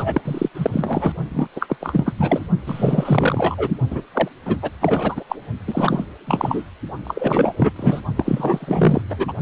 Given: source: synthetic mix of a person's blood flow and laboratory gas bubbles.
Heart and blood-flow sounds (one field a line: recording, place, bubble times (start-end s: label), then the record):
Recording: Doppler ultrasound of blood flow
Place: precordium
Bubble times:
0.00-0.21 s: bubbles
0.24-0.49 s: bubbles
0.54-1.12 s: bubbles
1.31-1.48 s: bubbles
1.56-1.77 s: bubbles
1.81-2.12 s: bubbles
2.18-2.44 s: bubbles
2.66-3.71 s: bubbles
3.90-4.01 s: bubbles
4.13-4.28 s: bubbles
4.45-4.57 s: bubbles
4.62-4.71 s: bubbles
4.80-5.24 s: bubbles
5.29-5.36 s: bubbles
5.67-6.04 s: bubbles
6.26-6.63 s: bubbles
7.04-7.73 s: bubbles
7.76-8.01 s: bubbles
8.16-9.01 s: bubbles
9.08-9.33 s: bubbles
From the record:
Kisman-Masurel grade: 444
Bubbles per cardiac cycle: continuous sound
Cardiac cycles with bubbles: 100%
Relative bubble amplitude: maximal (0.775 to 0.999)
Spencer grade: 4 (maximum detectable bubble signal sounding continuously throughout systole and diastole of every cardiac period, and overriding the amplitude of the normal cardiac signals)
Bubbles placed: only in the low amplitude regions of the cardiac cycle